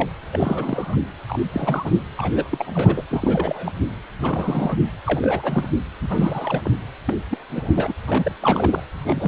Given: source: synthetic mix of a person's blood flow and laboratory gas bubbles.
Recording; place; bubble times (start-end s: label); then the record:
Doppler ultrasound of blood flow; precordium
0.00-0.09 s: bubbles
0.33-0.97 s: bubbles
1.28-1.38 s: bubbles
1.52-2.00 s: bubbles
2.17-3.02 s: bubbles
3.10-3.72 s: bubbles
4.22-4.76 s: bubbles
5.06-5.70 s: bubbles
6.01-6.71 s: bubbles
7.06-7.14 s: bubbles
7.30-7.38 s: bubbles
7.54-7.94 s: bubbles
8.07-8.32 s: bubbles
8.41-8.83 s: bubbles
8.98-9.28 s: bubbles
From the record:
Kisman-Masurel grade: 342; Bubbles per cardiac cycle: rolling drumbeat, 9 or more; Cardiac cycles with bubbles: 100%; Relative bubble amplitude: moderate (0.250 to 0.450); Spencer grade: 3 (all of the cardiac periods contain showers or single bubble signals, but not dominating or overriding the cardiac motion signals); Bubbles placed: anywhere in the cardiac cycle